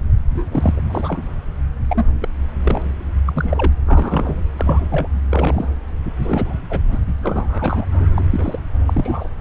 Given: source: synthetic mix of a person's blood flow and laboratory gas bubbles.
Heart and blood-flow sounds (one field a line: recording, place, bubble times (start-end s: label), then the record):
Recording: Doppler ultrasound of blood flow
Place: subclavian vein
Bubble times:
0.29-0.46 s: bubbles
0.51-0.81 s: bubbles
0.88-1.29 s: bubbles
1.90-2.04 s: bubbles
2.21-2.28 s: bubbles
2.62-2.82 s: bubbles
3.26-3.72 s: bubbles
3.86-4.37 s: bubbles
4.56-5.08 s: bubbles
5.29-5.68 s: bubbles
6.22-6.54 s: bubbles
6.70-6.80 s: bubbles
6.92-6.99 s: bubbles
7.23-7.85 s: bubbles
7.90-8.11 s: bubbles
8.15-8.25 s: bubbles
8.30-8.59 s: bubbles
8.87-9.29 s: bubbles
From the record:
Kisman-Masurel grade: 242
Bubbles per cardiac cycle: several, 3 to 8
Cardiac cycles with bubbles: 100%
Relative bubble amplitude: moderate (0.250 to 0.450)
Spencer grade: 3 (all of the cardiac periods contain showers or single bubble signals, but not dominating or overriding the cardiac motion signals)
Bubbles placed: anywhere in the cardiac cycle